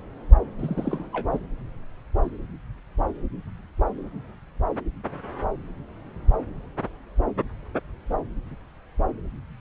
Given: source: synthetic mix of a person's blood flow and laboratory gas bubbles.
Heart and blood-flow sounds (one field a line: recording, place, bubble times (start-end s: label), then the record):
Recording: Doppler ultrasound of blood flow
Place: subclavian vein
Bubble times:
0.58-1.09 s: bubbles
1.12-1.27 s: bubbles
1.32-1.38 s: bubbles
From the record:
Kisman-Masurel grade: 211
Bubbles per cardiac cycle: several, 3 to 8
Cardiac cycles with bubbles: 1 to 10%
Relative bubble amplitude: barely perceptible (0.100 to 0.250)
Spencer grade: 1 (occasional bubble signal discernible with the cardiac motion signal, with majority of cardiac periods free of bubbles)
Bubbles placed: anywhere in the cardiac cycle